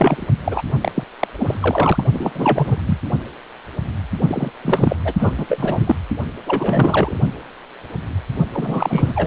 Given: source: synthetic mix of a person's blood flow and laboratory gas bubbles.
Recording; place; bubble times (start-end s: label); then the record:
Doppler ultrasound of blood flow; precordium
0.00-0.27 s: bubbles
0.44-0.61 s: bubbles
0.81-0.92 s: bubbles
0.95-1.04 s: bubbles
1.20-1.27 s: bubbles
1.38-2.04 s: bubbles
2.12-2.31 s: bubbles
2.34-2.76 s: bubbles
2.87-2.98 s: bubbles
4.28-4.50 s: bubbles
4.62-5.13 s: bubbles
5.18-5.46 s: bubbles
5.48-5.96 s: bubbles
6.46-7.16 s: bubbles
8.53-9.27 s: bubbles
From the record:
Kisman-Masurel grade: 332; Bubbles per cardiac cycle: rolling drumbeat, 9 or more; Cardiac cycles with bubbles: 50 to 99%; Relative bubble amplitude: moderate (0.250 to 0.450); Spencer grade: 3 (all of the cardiac periods contain showers or single bubble signals, but not dominating or overriding the cardiac motion signals); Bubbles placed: only in the low amplitude regions of the cardiac cycle